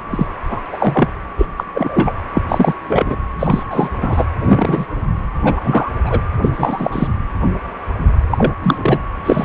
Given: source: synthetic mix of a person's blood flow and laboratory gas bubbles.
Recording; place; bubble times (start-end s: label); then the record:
Doppler ultrasound of blood flow; precordium
0.10-0.27 s: bubbles
0.49-0.59 s: bubbles
0.72-1.08 s: bubbles
1.37-1.46 s: bubbles
1.56-1.64 s: bubbles
1.73-2.13 s: bubbles
2.33-2.42 s: bubbles
2.48-2.74 s: bubbles
2.88-3.16 s: bubbles
3.39-3.63 s: bubbles
3.70-3.89 s: bubbles
4.00-4.25 s: bubbles
4.44-4.86 s: bubbles
5.43-5.90 s: bubbles
6.04-6.21 s: bubbles
6.42-6.49 s: bubbles
6.52-7.08 s: bubbles
8.31-8.53 s: bubbles
8.62-8.99 s: bubbles
9.25-9.45 s: bubbles
From the record:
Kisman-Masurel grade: 233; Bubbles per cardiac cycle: several, 3 to 8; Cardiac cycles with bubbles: 50 to 99%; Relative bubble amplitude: loud (0.450 to 0.775); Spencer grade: 3 (all of the cardiac periods contain showers or single bubble signals, but not dominating or overriding the cardiac motion signals); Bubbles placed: anywhere in the cardiac cycle